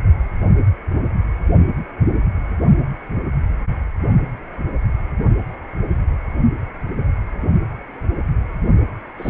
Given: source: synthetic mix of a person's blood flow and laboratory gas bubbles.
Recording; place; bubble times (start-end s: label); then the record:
Doppler ultrasound of blood flow; precordium
9.17-9.30 s: bubbles
From the record:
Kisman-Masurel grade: 211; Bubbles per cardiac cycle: several, 3 to 8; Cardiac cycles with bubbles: 1 to 10%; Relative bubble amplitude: barely perceptible (0.100 to 0.250); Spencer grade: 1 (occasional bubble signal discernible with the cardiac motion signal, with majority of cardiac periods free of bubbles); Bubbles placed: only in the low amplitude regions of the cardiac cycle